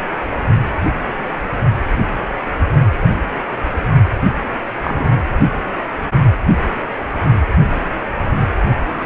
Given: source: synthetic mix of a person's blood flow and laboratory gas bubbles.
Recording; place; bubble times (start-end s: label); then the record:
Doppler ultrasound of blood flow; precordium
4.83-5.18 s: bubbles
From the record:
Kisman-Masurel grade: 113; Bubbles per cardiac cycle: 1 to 2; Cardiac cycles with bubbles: 1 to 10%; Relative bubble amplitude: loud (0.450 to 0.775); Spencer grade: 1 (occasional bubble signal discernible with the cardiac motion signal, with majority of cardiac periods free of bubbles); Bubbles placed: anywhere in the cardiac cycle